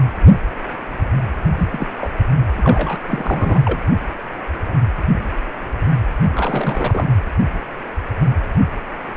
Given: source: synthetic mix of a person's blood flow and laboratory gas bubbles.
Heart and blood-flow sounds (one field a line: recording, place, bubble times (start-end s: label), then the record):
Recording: Doppler ultrasound of blood flow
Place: precordium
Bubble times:
1.57-1.68 s: bubbles
1.70-1.88 s: bubbles
1.97-2.10 s: bubbles
2.57-2.98 s: bubbles
3.07-3.60 s: bubbles
3.64-3.79 s: bubbles
6.22-6.29 s: bubbles
6.35-7.10 s: bubbles
From the record:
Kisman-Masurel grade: 222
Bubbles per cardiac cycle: several, 3 to 8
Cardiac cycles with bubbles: 10 to 50%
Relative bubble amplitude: moderate (0.250 to 0.450)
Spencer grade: 2 (many but less than half of the cardiac periods contain bubble signals, singularly or in groups)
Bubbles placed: anywhere in the cardiac cycle